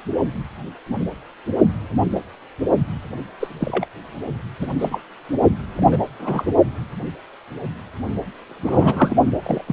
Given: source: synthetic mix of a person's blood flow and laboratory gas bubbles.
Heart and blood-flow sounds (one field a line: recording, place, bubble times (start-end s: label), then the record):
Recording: Doppler ultrasound of blood flow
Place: precordium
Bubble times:
3.40-3.48 s: bubbles
3.59-3.85 s: bubbles
4.60-4.67 s: bubbles
4.79-5.01 s: bubbles
5.75-5.99 s: bubbles
6.18-6.45 s: bubbles
8.47-9.16 s: bubbles
9.44-9.63 s: bubbles
9.67-9.72 s: bubbles
From the record:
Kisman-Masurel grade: 232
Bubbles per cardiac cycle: several, 3 to 8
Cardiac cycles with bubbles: 50 to 99%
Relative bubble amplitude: moderate (0.250 to 0.450)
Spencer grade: 3 (all of the cardiac periods contain showers or single bubble signals, but not dominating or overriding the cardiac motion signals)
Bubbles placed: only in the low amplitude regions of the cardiac cycle